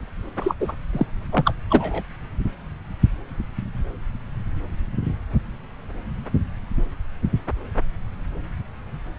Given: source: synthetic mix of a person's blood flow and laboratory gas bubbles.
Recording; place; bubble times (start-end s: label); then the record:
Doppler ultrasound of blood flow; subclavian vein
0.39-0.54 s: bubbles
0.60-0.72 s: bubbles
0.93-1.06 s: bubbles
1.32-1.54 s: bubbles
1.70-2.02 s: bubbles
From the record:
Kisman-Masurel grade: 223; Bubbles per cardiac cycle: several, 3 to 8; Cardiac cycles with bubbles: 10 to 50%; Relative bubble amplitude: loud (0.450 to 0.775); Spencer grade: 2 (many but less than half of the cardiac periods contain bubble signals, singularly or in groups); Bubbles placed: anywhere in the cardiac cycle